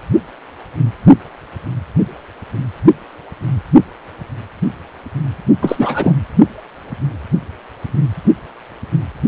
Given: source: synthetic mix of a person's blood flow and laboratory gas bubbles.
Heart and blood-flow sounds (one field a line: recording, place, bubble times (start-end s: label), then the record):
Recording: Doppler ultrasound of blood flow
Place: precordium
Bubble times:
5.62-6.17 s: bubbles
From the record:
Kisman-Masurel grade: 223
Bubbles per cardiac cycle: several, 3 to 8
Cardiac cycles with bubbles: 10 to 50%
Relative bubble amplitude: loud (0.450 to 0.775)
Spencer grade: 2 (many but less than half of the cardiac periods contain bubble signals, singularly or in groups)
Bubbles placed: only in the low amplitude regions of the cardiac cycle